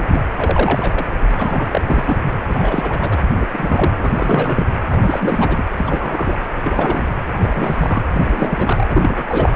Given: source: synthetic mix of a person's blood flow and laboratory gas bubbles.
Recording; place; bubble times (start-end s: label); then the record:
Doppler ultrasound of blood flow; precordium
0.00-0.24 s: bubbles
0.36-1.05 s: bubbles
1.26-2.19 s: bubbles
2.48-3.18 s: bubbles
3.29-3.46 s: bubbles
3.52-4.66 s: bubbles
4.90-5.64 s: bubbles
5.76-6.38 s: bubbles
6.64-7.08 s: bubbles
7.38-8.04 s: bubbles
8.11-8.87 s: bubbles
8.89-9.24 s: bubbles
9.29-9.56 s: bubbles
From the record:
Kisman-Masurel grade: 342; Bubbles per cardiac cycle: rolling drumbeat, 9 or more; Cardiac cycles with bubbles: 100%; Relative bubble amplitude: moderate (0.250 to 0.450); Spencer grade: 3 (all of the cardiac periods contain showers or single bubble signals, but not dominating or overriding the cardiac motion signals); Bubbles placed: anywhere in the cardiac cycle